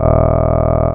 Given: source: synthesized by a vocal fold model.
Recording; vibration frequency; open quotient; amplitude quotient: sustained vowel; 40 Hz; 0.3; 1